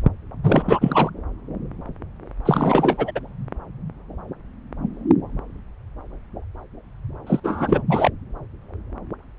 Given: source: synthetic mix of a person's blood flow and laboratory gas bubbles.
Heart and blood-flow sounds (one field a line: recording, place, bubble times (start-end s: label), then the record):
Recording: Doppler ultrasound of blood flow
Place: subclavian vein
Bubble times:
0.43-1.10 s: bubbles
2.45-3.11 s: bubbles
3.15-3.20 s: bubbles
7.26-7.40 s: bubbles
7.43-7.82 s: bubbles
7.87-8.11 s: bubbles
From the record:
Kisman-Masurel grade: 333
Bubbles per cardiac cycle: rolling drumbeat, 9 or more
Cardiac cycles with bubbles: 50 to 99%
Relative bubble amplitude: loud (0.450 to 0.775)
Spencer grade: 3 (all of the cardiac periods contain showers or single bubble signals, but not dominating or overriding the cardiac motion signals)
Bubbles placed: anywhere in the cardiac cycle